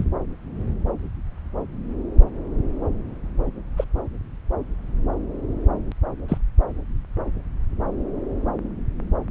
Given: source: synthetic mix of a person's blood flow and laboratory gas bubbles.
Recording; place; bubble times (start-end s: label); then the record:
Doppler ultrasound of blood flow; subclavian vein
0.00-0.04 s: bubbles
3.77-3.84 s: bubbles
6.28-6.38 s: bubbles
From the record:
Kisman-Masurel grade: 122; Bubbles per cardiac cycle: 1 to 2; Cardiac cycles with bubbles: 10 to 50%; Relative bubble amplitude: moderate (0.250 to 0.450); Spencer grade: 2 (many but less than half of the cardiac periods contain bubble signals, singularly or in groups); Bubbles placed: anywhere in the cardiac cycle